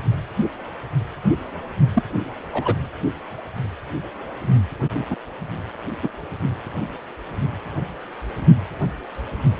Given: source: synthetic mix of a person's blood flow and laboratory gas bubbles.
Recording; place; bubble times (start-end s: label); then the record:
Doppler ultrasound of blood flow; precordium
1.94-2.02 s: bubbles
2.52-2.75 s: bubbles
5.10-5.16 s: bubbles
6.03-6.10 s: bubbles
From the record:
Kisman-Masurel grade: 122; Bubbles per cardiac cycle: 1 to 2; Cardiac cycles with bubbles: 10 to 50%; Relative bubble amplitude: moderate (0.250 to 0.450); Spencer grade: 2 (many but less than half of the cardiac periods contain bubble signals, singularly or in groups); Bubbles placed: only in the low amplitude regions of the cardiac cycle